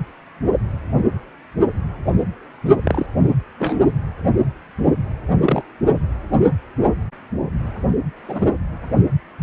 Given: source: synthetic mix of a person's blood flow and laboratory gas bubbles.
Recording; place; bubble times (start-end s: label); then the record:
Doppler ultrasound of blood flow; precordium
2.65-2.75 s: bubbles
2.83-3.06 s: bubbles
3.58-3.77 s: bubbles
5.44-5.62 s: bubbles
8.28-8.46 s: bubbles
From the record:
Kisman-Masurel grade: 122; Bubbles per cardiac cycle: 1 to 2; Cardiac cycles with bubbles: 10 to 50%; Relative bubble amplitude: moderate (0.250 to 0.450); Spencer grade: 2 (many but less than half of the cardiac periods contain bubble signals, singularly or in groups); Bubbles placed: anywhere in the cardiac cycle